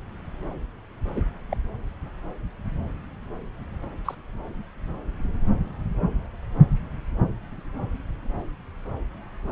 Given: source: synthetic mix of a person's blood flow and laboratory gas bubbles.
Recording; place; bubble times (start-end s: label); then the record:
Doppler ultrasound of blood flow; subclavian vein
1.15-1.21 s: bubbles
1.50-1.57 s: bubbles
4.05-4.15 s: bubbles
From the record:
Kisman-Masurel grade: 122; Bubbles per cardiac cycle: 1 to 2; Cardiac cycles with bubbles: 10 to 50%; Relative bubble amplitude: moderate (0.250 to 0.450); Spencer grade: 2 (many but less than half of the cardiac periods contain bubble signals, singularly or in groups); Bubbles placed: anywhere in the cardiac cycle